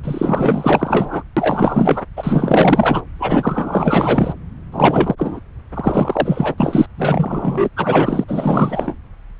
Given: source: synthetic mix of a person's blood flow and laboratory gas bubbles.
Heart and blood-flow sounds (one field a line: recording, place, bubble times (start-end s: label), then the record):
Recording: Doppler ultrasound of blood flow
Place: subclavian vein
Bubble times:
0.03-1.23 s: bubbles
1.36-2.04 s: bubbles
2.17-3.02 s: bubbles
3.19-4.33 s: bubbles
4.72-5.14 s: bubbles
5.18-5.40 s: bubbles
5.74-6.54 s: bubbles
6.58-6.86 s: bubbles
6.97-7.69 s: bubbles
7.76-8.24 s: bubbles
8.28-8.94 s: bubbles
From the record:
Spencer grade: 4 (maximum detectable bubble signal sounding continuously throughout systole and diastole of every cardiac period, and overriding the amplitude of the normal cardiac signals)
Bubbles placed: anywhere in the cardiac cycle